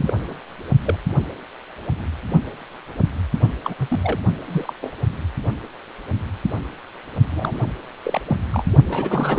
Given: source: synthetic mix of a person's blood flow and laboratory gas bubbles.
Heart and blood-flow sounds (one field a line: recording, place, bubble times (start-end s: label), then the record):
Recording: Doppler ultrasound of blood flow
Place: precordium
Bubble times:
0.00-0.14 s: bubbles
0.23-0.38 s: bubbles
0.85-0.98 s: bubbles
3.64-3.75 s: bubbles
3.79-4.20 s: bubbles
4.45-4.73 s: bubbles
4.81-4.92 s: bubbles
7.30-7.60 s: bubbles
8.05-8.21 s: bubbles
8.28-8.37 s: bubbles
8.52-8.63 s: bubbles
8.87-9.39 s: bubbles
From the record:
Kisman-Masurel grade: 232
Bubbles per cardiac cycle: several, 3 to 8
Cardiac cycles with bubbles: 50 to 99%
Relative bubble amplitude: moderate (0.250 to 0.450)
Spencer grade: 3 (all of the cardiac periods contain showers or single bubble signals, but not dominating or overriding the cardiac motion signals)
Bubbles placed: only in the low amplitude regions of the cardiac cycle